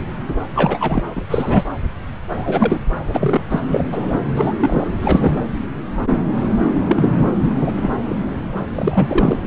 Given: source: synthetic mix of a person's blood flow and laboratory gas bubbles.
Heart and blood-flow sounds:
Doppler ultrasound of blood flow; subclavian vein
0.55-0.77 s: bubbles
0.80-1.04 s: bubbles
1.15-1.22 s: bubbles
1.29-1.64 s: bubbles
2.29-2.78 s: bubbles
3.08-3.40 s: bubbles
3.50-3.62 s: bubbles
3.71-3.84 s: bubbles
3.92-4.20 s: bubbles
4.35-4.54 s: bubbles
4.60-4.88 s: bubbles
5.03-5.44 s: bubbles
6.88-7.26 s: bubbles
7.42-7.50 s: bubbles
7.61-7.91 s: bubbles
8.03-8.17 s: bubbles
8.75-9.39 s: bubbles
From the record:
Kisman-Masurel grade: 233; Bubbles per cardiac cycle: several, 3 to 8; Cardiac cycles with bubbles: 50 to 99%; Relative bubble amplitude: loud (0.450 to 0.775); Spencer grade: 3 (all of the cardiac periods contain showers or single bubble signals, but not dominating or overriding the cardiac motion signals); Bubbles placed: anywhere in the cardiac cycle

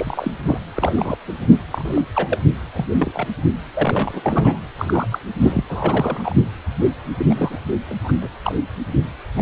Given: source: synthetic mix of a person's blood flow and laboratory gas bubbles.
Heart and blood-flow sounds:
Doppler ultrasound of blood flow; precordium
0.00-0.31 s: bubbles
0.45-0.58 s: bubbles
0.75-1.18 s: bubbles
1.27-1.59 s: bubbles
1.74-2.02 s: bubbles
2.15-2.42 s: bubbles
2.73-2.88 s: bubbles
2.94-3.27 s: bubbles
3.75-4.60 s: bubbles
4.78-5.07 s: bubbles
5.10-5.18 s: bubbles
5.40-5.62 s: bubbles
5.69-6.35 s: bubbles
7.17-7.62 s: bubbles
7.90-7.93 s: bubbles
8.04-8.12 s: bubbles
8.21-8.28 s: bubbles
8.44-8.55 s: bubbles
9.37-9.42 s: bubbles
From the record:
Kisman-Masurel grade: 242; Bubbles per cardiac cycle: several, 3 to 8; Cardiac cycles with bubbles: 100%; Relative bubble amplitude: moderate (0.250 to 0.450); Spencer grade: 3 (all of the cardiac periods contain showers or single bubble signals, but not dominating or overriding the cardiac motion signals); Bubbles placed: anywhere in the cardiac cycle

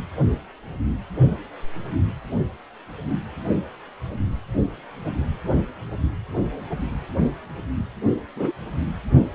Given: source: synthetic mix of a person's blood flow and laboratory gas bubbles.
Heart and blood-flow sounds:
Doppler ultrasound of blood flow; precordium
8.36-8.53 s: bubbles
From the record:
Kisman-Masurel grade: 122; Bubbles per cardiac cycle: 1 to 2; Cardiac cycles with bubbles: 10 to 50%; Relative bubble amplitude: moderate (0.250 to 0.450); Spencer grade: 2 (many but less than half of the cardiac periods contain bubble signals, singularly or in groups); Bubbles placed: anywhere in the cardiac cycle

